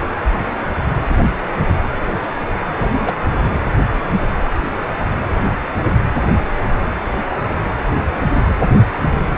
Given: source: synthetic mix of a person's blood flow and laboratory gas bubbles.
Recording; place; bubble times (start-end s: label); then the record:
Doppler ultrasound of blood flow; precordium
2.78-2.89 s: bubbles
2.98-3.14 s: bubbles
From the record:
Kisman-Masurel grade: 113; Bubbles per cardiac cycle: 1 to 2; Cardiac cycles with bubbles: 1 to 10%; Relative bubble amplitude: loud (0.450 to 0.775); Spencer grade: 1 (occasional bubble signal discernible with the cardiac motion signal, with majority of cardiac periods free of bubbles); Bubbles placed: anywhere in the cardiac cycle